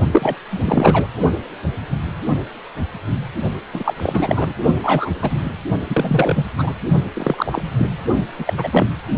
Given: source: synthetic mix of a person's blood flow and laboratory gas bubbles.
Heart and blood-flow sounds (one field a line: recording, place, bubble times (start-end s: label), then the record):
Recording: Doppler ultrasound of blood flow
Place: precordium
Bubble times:
0.11-0.37 s: bubbles
0.50-1.07 s: bubbles
3.74-3.94 s: bubbles
3.96-4.54 s: bubbles
4.83-5.13 s: bubbles
5.21-5.50 s: bubbles
5.90-6.45 s: bubbles
6.58-6.73 s: bubbles
7.13-7.62 s: bubbles
7.78-7.91 s: bubbles
8.38-8.53 s: bubbles
8.57-8.69 s: bubbles
8.71-8.88 s: bubbles
From the record:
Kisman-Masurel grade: 233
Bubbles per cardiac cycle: several, 3 to 8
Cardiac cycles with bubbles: 50 to 99%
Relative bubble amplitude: loud (0.450 to 0.775)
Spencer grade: 3 (all of the cardiac periods contain showers or single bubble signals, but not dominating or overriding the cardiac motion signals)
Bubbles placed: only in the low amplitude regions of the cardiac cycle